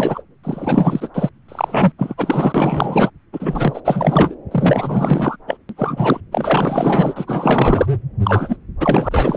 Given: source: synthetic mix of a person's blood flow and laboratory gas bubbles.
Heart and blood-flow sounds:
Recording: Doppler ultrasound of blood flow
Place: subclavian vein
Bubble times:
0.00-0.22 s: bubbles
0.43-1.10 s: bubbles
1.14-1.29 s: bubbles
1.48-1.92 s: bubbles
1.98-2.15 s: bubbles
2.17-3.10 s: bubbles
3.32-3.81 s: bubbles
3.84-4.36 s: bubbles
4.51-5.37 s: bubbles
5.47-5.57 s: bubbles
5.69-5.74 s: bubbles
5.77-6.21 s: bubbles
6.32-7.86 s: bubbles
8.23-8.57 s: bubbles
8.80-9.37 s: bubbles
From the record:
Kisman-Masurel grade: 444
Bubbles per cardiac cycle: continuous sound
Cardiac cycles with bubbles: 100%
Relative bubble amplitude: maximal (0.775 to 0.999)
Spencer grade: 4 (maximum detectable bubble signal sounding continuously throughout systole and diastole of every cardiac period, and overriding the amplitude of the normal cardiac signals)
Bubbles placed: anywhere in the cardiac cycle

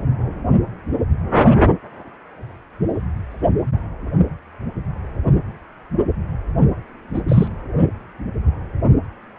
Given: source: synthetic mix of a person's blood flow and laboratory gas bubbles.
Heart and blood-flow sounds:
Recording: Doppler ultrasound of blood flow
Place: precordium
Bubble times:
7.13-7.21 s: bubbles
7.28-7.48 s: bubbles
From the record:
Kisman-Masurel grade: 113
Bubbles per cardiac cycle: 1 to 2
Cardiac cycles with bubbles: 1 to 10%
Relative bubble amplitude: loud (0.450 to 0.775)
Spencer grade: 1 (occasional bubble signal discernible with the cardiac motion signal, with majority of cardiac periods free of bubbles)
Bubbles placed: only in the low amplitude regions of the cardiac cycle

